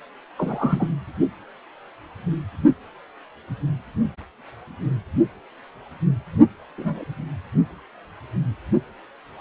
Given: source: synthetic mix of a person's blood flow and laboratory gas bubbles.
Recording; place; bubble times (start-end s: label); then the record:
Doppler ultrasound of blood flow; precordium
0.37-0.87 s: bubbles
6.77-7.04 s: bubbles
From the record:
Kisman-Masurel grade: 122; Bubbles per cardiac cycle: 1 to 2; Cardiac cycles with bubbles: 10 to 50%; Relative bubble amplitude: moderate (0.250 to 0.450); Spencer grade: 2 (many but less than half of the cardiac periods contain bubble signals, singularly or in groups); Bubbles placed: only in the low amplitude regions of the cardiac cycle